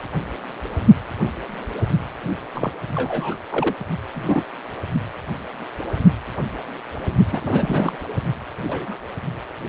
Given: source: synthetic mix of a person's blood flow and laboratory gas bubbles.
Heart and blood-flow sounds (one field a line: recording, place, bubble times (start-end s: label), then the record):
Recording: Doppler ultrasound of blood flow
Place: precordium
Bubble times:
2.54-2.71 s: bubbles
2.95-3.36 s: bubbles
3.51-3.75 s: bubbles
4.14-4.43 s: bubbles
7.32-7.42 s: bubbles
7.44-8.00 s: bubbles
8.67-8.98 s: bubbles
From the record:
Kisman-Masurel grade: 222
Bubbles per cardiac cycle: several, 3 to 8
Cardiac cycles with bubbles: 10 to 50%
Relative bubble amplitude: moderate (0.250 to 0.450)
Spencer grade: 2 (many but less than half of the cardiac periods contain bubble signals, singularly or in groups)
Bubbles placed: only in the low amplitude regions of the cardiac cycle